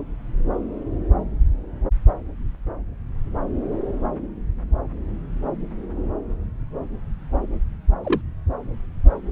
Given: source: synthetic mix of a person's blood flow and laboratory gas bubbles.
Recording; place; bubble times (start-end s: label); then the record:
Doppler ultrasound of blood flow; subclavian vein
8.04-8.21 s: bubbles
From the record:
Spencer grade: 1 (occasional bubble signal discernible with the cardiac motion signal, with majority of cardiac periods free of bubbles); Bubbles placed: anywhere in the cardiac cycle